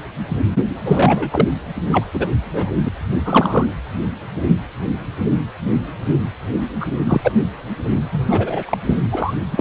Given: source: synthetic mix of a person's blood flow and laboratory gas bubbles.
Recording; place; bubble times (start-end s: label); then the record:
Doppler ultrasound of blood flow; precordium
0.85-1.48 s: bubbles
1.91-2.04 s: bubbles
2.13-2.28 s: bubbles
2.43-2.71 s: bubbles
2.84-2.89 s: bubbles
3.25-3.68 s: bubbles
6.80-6.88 s: bubbles
7.04-7.32 s: bubbles
8.12-8.78 s: bubbles
8.85-8.97 s: bubbles
9.12-9.34 s: bubbles
9.52-9.61 s: bubbles
From the record:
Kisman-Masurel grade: 233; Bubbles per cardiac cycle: several, 3 to 8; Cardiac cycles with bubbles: 50 to 99%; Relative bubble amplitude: loud (0.450 to 0.775); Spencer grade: 3 (all of the cardiac periods contain showers or single bubble signals, but not dominating or overriding the cardiac motion signals); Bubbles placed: anywhere in the cardiac cycle